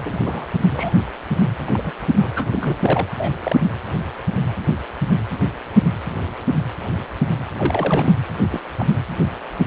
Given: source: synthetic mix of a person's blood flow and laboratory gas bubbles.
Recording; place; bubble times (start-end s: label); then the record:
Doppler ultrasound of blood flow; precordium
0.05-0.18 s: bubbles
0.24-0.47 s: bubbles
0.73-0.93 s: bubbles
1.66-1.93 s: bubbles
2.13-2.32 s: bubbles
2.35-2.45 s: bubbles
2.51-2.77 s: bubbles
2.81-3.07 s: bubbles
3.18-3.35 s: bubbles
3.40-3.56 s: bubbles
7.57-8.13 s: bubbles
8.51-8.60 s: bubbles
8.77-8.95 s: bubbles
From the record:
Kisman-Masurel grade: 232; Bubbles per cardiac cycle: several, 3 to 8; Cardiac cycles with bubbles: 50 to 99%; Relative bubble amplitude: moderate (0.250 to 0.450); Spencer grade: 3 (all of the cardiac periods contain showers or single bubble signals, but not dominating or overriding the cardiac motion signals); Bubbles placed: anywhere in the cardiac cycle